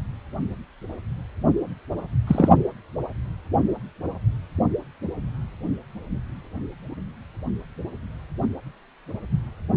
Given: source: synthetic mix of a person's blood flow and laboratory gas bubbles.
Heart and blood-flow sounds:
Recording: Doppler ultrasound of blood flow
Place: precordium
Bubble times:
2.27-2.49 s: bubbles
From the record:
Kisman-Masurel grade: 113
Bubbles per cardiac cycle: 1 to 2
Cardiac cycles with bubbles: 1 to 10%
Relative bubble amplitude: loud (0.450 to 0.775)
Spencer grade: 1 (occasional bubble signal discernible with the cardiac motion signal, with majority of cardiac periods free of bubbles)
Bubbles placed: only in the low amplitude regions of the cardiac cycle

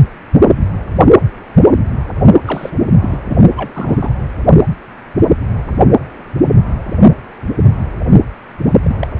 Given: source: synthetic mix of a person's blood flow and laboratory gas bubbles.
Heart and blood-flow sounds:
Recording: Doppler ultrasound of blood flow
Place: precordium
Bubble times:
2.46-2.71 s: bubbles
3.00-3.18 s: bubbles
3.28-3.40 s: bubbles
3.56-4.12 s: bubbles
8.82-8.96 s: bubbles
8.99-9.07 s: bubbles
From the record:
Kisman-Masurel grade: 222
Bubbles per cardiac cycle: several, 3 to 8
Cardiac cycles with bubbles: 10 to 50%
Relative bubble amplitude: moderate (0.250 to 0.450)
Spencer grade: 2 (many but less than half of the cardiac periods contain bubble signals, singularly or in groups)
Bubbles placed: only in the low amplitude regions of the cardiac cycle

